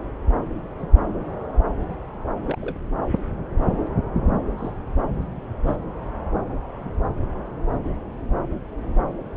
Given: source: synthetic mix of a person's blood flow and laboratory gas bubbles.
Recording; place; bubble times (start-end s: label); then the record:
Doppler ultrasound of blood flow; subclavian vein
0.78-0.88 s: bubbles
1.89-1.96 s: bubbles
2.45-2.58 s: bubbles
2.61-2.76 s: bubbles
4.57-4.74 s: bubbles
4.99-5.01 s: bubbles
5.67-5.76 s: bubbles
From the record:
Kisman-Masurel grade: 121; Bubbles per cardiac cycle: 1 to 2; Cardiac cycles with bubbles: 10 to 50%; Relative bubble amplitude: barely perceptible (0.100 to 0.250); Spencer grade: 2 (many but less than half of the cardiac periods contain bubble signals, singularly or in groups); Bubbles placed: anywhere in the cardiac cycle